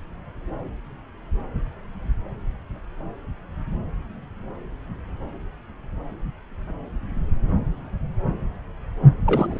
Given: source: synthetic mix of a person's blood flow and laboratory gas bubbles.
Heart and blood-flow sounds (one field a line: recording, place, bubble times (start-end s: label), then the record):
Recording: Doppler ultrasound of blood flow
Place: subclavian vein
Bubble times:
9.25-9.60 s: bubbles
From the record:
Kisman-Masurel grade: 222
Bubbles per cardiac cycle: several, 3 to 8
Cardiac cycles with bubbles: 10 to 50%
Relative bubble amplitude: moderate (0.250 to 0.450)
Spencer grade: 2 (many but less than half of the cardiac periods contain bubble signals, singularly or in groups)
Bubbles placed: anywhere in the cardiac cycle